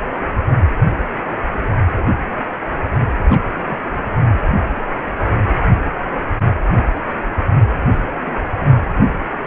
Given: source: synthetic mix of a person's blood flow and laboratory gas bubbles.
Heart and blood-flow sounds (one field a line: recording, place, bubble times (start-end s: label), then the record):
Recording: Doppler ultrasound of blood flow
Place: precordium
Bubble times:
3.30-3.43 s: bubbles
3.69-3.77 s: bubbles
8.25-8.33 s: bubbles
8.60-8.70 s: bubbles
From the record:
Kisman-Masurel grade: 121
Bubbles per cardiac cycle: 1 to 2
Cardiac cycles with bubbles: 10 to 50%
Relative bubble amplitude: barely perceptible (0.100 to 0.250)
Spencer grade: 2 (many but less than half of the cardiac periods contain bubble signals, singularly or in groups)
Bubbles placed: anywhere in the cardiac cycle